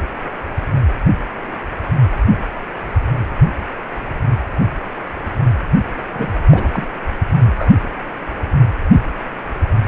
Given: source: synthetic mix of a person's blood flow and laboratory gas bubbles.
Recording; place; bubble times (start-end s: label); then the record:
Doppler ultrasound of blood flow; precordium
6.08-6.32 s: bubbles
6.50-6.87 s: bubbles
7.43-7.88 s: bubbles
From the record:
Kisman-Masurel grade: 212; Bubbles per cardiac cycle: several, 3 to 8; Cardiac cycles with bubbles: 1 to 10%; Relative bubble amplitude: moderate (0.250 to 0.450); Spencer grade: 1 (occasional bubble signal discernible with the cardiac motion signal, with majority of cardiac periods free of bubbles); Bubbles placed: anywhere in the cardiac cycle